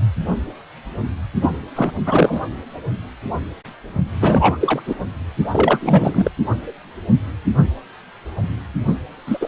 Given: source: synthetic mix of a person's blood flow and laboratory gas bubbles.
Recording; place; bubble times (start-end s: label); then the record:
Doppler ultrasound of blood flow; precordium
1.41-1.50 s: bubbles
1.75-1.92 s: bubbles
2.06-2.40 s: bubbles
4.21-4.58 s: bubbles
4.61-4.81 s: bubbles
4.87-4.95 s: bubbles
5.52-6.29 s: bubbles
9.26-9.38 s: bubbles
9.40-9.48 s: bubbles
From the record:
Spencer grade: 2 (many but less than half of the cardiac periods contain bubble signals, singularly or in groups); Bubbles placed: only in the low amplitude regions of the cardiac cycle